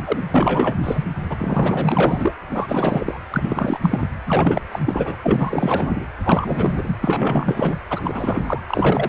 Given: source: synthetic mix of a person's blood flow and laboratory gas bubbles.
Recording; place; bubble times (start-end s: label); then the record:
Doppler ultrasound of blood flow; precordium
0.05-0.24 s: bubbles
0.34-0.75 s: bubbles
0.84-1.06 s: bubbles
1.29-2.35 s: bubbles
2.52-3.20 s: bubbles
3.30-4.08 s: bubbles
4.26-4.62 s: bubbles
4.71-4.79 s: bubbles
4.85-5.17 s: bubbles
5.22-6.07 s: bubbles
6.23-6.96 s: bubbles
7.01-7.78 s: bubbles
7.89-8.44 s: bubbles
8.46-8.61 s: bubbles
8.66-9.09 s: bubbles
From the record:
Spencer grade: 4 (maximum detectable bubble signal sounding continuously throughout systole and diastole of every cardiac period, and overriding the amplitude of the normal cardiac signals); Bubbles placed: anywhere in the cardiac cycle